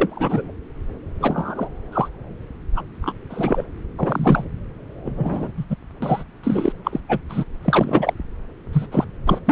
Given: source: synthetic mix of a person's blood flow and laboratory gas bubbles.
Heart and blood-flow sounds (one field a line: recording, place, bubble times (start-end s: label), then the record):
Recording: Doppler ultrasound of blood flow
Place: subclavian vein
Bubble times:
0.00-0.52 s: bubbles
1.20-1.68 s: bubbles
1.92-2.08 s: bubbles
2.75-2.82 s: bubbles
3.02-3.14 s: bubbles
3.29-3.66 s: bubbles
3.98-4.45 s: bubbles
5.04-5.52 s: bubbles
5.57-5.66 s: bubbles
5.70-5.77 s: bubbles
6.02-6.24 s: bubbles
6.43-6.73 s: bubbles
6.84-7.00 s: bubbles
7.08-7.19 s: bubbles
7.29-7.45 s: bubbles
7.65-8.13 s: bubbles
8.72-8.87 s: bubbles
8.91-9.04 s: bubbles
9.26-9.39 s: bubbles
9.46-9.52 s: bubbles
From the record:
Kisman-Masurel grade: 243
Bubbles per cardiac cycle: several, 3 to 8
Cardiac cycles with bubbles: 100%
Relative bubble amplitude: loud (0.450 to 0.775)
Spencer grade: 3 (all of the cardiac periods contain showers or single bubble signals, but not dominating or overriding the cardiac motion signals)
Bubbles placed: anywhere in the cardiac cycle